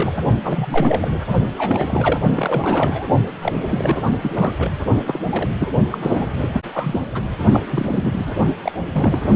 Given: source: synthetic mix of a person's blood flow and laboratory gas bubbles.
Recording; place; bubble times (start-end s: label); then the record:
Doppler ultrasound of blood flow; precordium
0.00-0.17 s: bubbles
0.43-1.09 s: bubbles
1.57-2.20 s: bubbles
2.35-3.05 s: bubbles
3.42-3.54 s: bubbles
3.60-4.02 s: bubbles
4.22-4.55 s: bubbles
4.58-4.71 s: bubbles
5.06-5.21 s: bubbles
5.30-5.48 s: bubbles
5.59-5.71 s: bubbles
5.90-5.98 s: bubbles
6.02-6.60 s: bubbles
6.72-7.07 s: bubbles
7.14-7.25 s: bubbles
7.51-7.60 s: bubbles
7.68-8.33 s: bubbles
8.62-8.72 s: bubbles
8.94-9.27 s: bubbles
From the record:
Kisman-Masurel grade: 342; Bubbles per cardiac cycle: rolling drumbeat, 9 or more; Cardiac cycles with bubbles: 100%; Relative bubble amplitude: moderate (0.250 to 0.450); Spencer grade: 3 (all of the cardiac periods contain showers or single bubble signals, but not dominating or overriding the cardiac motion signals); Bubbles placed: only in the low amplitude regions of the cardiac cycle